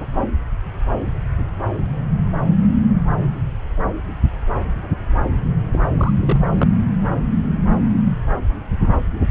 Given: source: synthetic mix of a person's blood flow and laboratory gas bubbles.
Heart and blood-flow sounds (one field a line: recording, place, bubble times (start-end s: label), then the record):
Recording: Doppler ultrasound of blood flow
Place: subclavian vein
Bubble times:
5.72-5.84 s: bubbles
5.97-6.13 s: bubbles
6.22-6.38 s: bubbles
6.54-6.71 s: bubbles
From the record:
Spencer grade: 1 (occasional bubble signal discernible with the cardiac motion signal, with majority of cardiac periods free of bubbles)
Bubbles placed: anywhere in the cardiac cycle